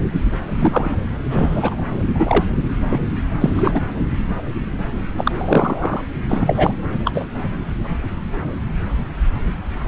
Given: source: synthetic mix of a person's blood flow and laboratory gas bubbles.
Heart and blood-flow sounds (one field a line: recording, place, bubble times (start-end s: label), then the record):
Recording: Doppler ultrasound of blood flow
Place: subclavian vein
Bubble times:
0.56-0.91 s: bubbles
1.25-1.81 s: bubbles
1.94-2.44 s: bubbles
2.90-3.00 s: bubbles
3.40-3.50 s: bubbles
3.56-3.80 s: bubbles
5.17-6.01 s: bubbles
6.29-6.72 s: bubbles
7.04-7.26 s: bubbles
From the record:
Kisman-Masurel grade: 233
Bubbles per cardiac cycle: several, 3 to 8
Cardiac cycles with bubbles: 50 to 99%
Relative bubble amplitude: loud (0.450 to 0.775)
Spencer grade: 3 (all of the cardiac periods contain showers or single bubble signals, but not dominating or overriding the cardiac motion signals)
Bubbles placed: anywhere in the cardiac cycle